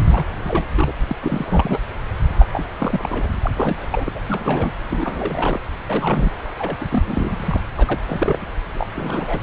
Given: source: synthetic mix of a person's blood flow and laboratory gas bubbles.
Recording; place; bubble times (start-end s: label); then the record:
Doppler ultrasound of blood flow; subclavian vein
0.11-0.26 s: bubbles
0.45-0.65 s: bubbles
0.75-0.93 s: bubbles
1.08-1.16 s: bubbles
1.23-1.79 s: bubbles
2.39-2.46 s: bubbles
2.52-2.67 s: bubbles
2.79-3.26 s: bubbles
3.42-3.51 s: bubbles
3.56-3.86 s: bubbles
3.92-4.11 s: bubbles
4.14-4.21 s: bubbles
4.24-4.72 s: bubbles
4.89-5.59 s: bubbles
5.88-6.30 s: bubbles
6.58-6.76 s: bubbles
6.80-6.85 s: bubbles
6.90-7.60 s: bubbles
7.76-7.99 s: bubbles
8.07-8.51 s: bubbles
8.74-8.87 s: bubbles
8.98-9.41 s: bubbles
From the record:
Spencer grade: 3 (all of the cardiac periods contain showers or single bubble signals, but not dominating or overriding the cardiac motion signals); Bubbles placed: anywhere in the cardiac cycle